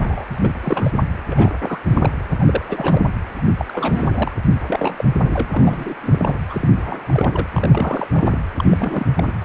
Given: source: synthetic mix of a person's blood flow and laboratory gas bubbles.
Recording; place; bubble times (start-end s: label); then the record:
Doppler ultrasound of blood flow; precordium
0.00-0.24 s: bubbles
0.30-0.51 s: bubbles
0.63-0.91 s: bubbles
1.30-1.51 s: bubbles
1.62-1.79 s: bubbles
1.91-2.11 s: bubbles
2.31-2.36 s: bubbles
2.39-2.65 s: bubbles
2.68-3.09 s: bubbles
3.36-3.41 s: bubbles
3.57-3.65 s: bubbles
3.69-4.31 s: bubbles
4.67-5.05 s: bubbles
5.23-5.45 s: bubbles
5.52-5.95 s: bubbles
6.01-6.39 s: bubbles
6.50-7.47 s: bubbles
7.53-8.07 s: bubbles
8.13-8.39 s: bubbles
8.56-9.08 s: bubbles
9.16-9.31 s: bubbles
From the record:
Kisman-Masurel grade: 342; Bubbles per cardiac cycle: rolling drumbeat, 9 or more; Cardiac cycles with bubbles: 100%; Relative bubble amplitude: moderate (0.250 to 0.450); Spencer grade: 3 (all of the cardiac periods contain showers or single bubble signals, but not dominating or overriding the cardiac motion signals); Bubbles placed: anywhere in the cardiac cycle